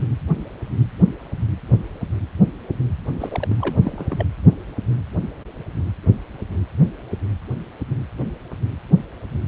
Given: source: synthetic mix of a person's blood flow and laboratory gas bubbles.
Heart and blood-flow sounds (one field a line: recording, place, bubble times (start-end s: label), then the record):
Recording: Doppler ultrasound of blood flow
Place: precordium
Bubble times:
3.19-3.56 s: bubbles
3.59-3.80 s: bubbles
3.84-4.25 s: bubbles
From the record:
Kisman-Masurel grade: 211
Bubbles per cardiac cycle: several, 3 to 8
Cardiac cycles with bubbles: 1 to 10%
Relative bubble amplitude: barely perceptible (0.100 to 0.250)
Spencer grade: 1 (occasional bubble signal discernible with the cardiac motion signal, with majority of cardiac periods free of bubbles)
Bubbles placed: anywhere in the cardiac cycle